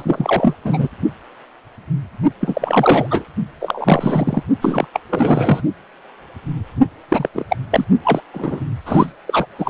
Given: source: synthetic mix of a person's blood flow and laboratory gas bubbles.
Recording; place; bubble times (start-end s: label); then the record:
Doppler ultrasound of blood flow; precordium
0.00-0.54 s: bubbles
0.65-0.88 s: bubbles
2.41-3.25 s: bubbles
3.60-4.43 s: bubbles
4.62-4.86 s: bubbles
4.93-5.00 s: bubbles
5.09-5.62 s: bubbles
7.08-7.29 s: bubbles
7.33-7.45 s: bubbles
7.49-7.56 s: bubbles
7.71-7.85 s: bubbles
8.04-8.21 s: bubbles
8.33-8.60 s: bubbles
8.85-9.10 s: bubbles
9.27-9.46 s: bubbles
9.58-9.70 s: bubbles
From the record:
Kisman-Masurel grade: 333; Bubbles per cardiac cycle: rolling drumbeat, 9 or more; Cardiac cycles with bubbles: 50 to 99%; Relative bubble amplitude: loud (0.450 to 0.775); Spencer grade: 3 (all of the cardiac periods contain showers or single bubble signals, but not dominating or overriding the cardiac motion signals); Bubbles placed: only in the low amplitude regions of the cardiac cycle